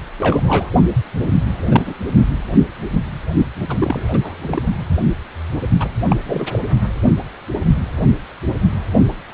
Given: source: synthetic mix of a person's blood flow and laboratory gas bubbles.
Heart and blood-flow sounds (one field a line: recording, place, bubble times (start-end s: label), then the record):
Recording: Doppler ultrasound of blood flow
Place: precordium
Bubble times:
0.18-0.70 s: bubbles
1.71-1.95 s: bubbles
3.69-4.62 s: bubbles
5.79-5.89 s: bubbles
6.09-6.17 s: bubbles
6.25-6.47 s: bubbles
6.52-6.59 s: bubbles
From the record:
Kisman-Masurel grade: 222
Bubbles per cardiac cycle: several, 3 to 8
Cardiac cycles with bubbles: 10 to 50%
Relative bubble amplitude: moderate (0.250 to 0.450)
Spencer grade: 2 (many but less than half of the cardiac periods contain bubble signals, singularly or in groups)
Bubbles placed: only in the low amplitude regions of the cardiac cycle